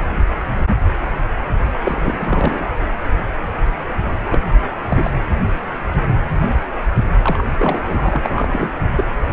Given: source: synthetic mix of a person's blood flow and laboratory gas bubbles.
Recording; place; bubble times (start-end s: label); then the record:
Doppler ultrasound of blood flow; precordium
1.83-2.66 s: bubbles
4.30-4.40 s: bubbles
4.89-5.10 s: bubbles
7.22-7.44 s: bubbles
7.58-8.70 s: bubbles
8.96-9.04 s: bubbles
From the record:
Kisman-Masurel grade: 222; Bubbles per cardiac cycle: several, 3 to 8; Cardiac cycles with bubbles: 10 to 50%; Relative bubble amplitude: moderate (0.250 to 0.450); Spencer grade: 2 (many but less than half of the cardiac periods contain bubble signals, singularly or in groups); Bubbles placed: anywhere in the cardiac cycle